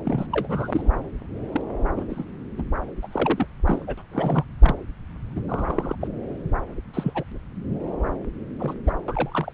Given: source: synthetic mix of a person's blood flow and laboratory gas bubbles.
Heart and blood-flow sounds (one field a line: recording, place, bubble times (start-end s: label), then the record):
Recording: Doppler ultrasound of blood flow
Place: subclavian vein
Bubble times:
0.05-0.89 s: bubbles
1.52-1.61 s: bubbles
1.96-2.07 s: bubbles
2.09-2.25 s: bubbles
2.58-2.62 s: bubbles
3.02-3.07 s: bubbles
3.12-3.46 s: bubbles
3.65-3.95 s: bubbles
3.98-4.02 s: bubbles
4.12-4.45 s: bubbles
4.61-4.75 s: bubbles
5.35-5.41 s: bubbles
5.48-5.96 s: bubbles
6.01-6.08 s: bubbles
6.94-7.24 s: bubbles
8.58-8.74 s: bubbles
8.85-8.91 s: bubbles
9.08-9.52 s: bubbles
From the record:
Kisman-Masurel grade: 242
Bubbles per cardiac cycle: several, 3 to 8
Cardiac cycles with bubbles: 100%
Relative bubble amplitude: moderate (0.250 to 0.450)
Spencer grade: 3 (all of the cardiac periods contain showers or single bubble signals, but not dominating or overriding the cardiac motion signals)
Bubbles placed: anywhere in the cardiac cycle